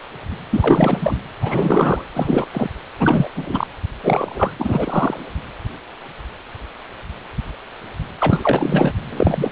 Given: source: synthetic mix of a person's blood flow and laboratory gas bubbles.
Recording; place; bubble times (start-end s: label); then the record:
Doppler ultrasound of blood flow; precordium
0.52-1.17 s: bubbles
1.42-2.04 s: bubbles
2.14-2.46 s: bubbles
2.52-2.69 s: bubbles
2.99-3.29 s: bubbles
3.35-3.67 s: bubbles
4.03-4.51 s: bubbles
4.58-5.17 s: bubbles
8.19-8.93 s: bubbles
9.09-9.52 s: bubbles
From the record:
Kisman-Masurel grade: 333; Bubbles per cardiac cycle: rolling drumbeat, 9 or more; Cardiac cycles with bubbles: 50 to 99%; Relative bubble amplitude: loud (0.450 to 0.775); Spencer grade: 3 (all of the cardiac periods contain showers or single bubble signals, but not dominating or overriding the cardiac motion signals); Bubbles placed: anywhere in the cardiac cycle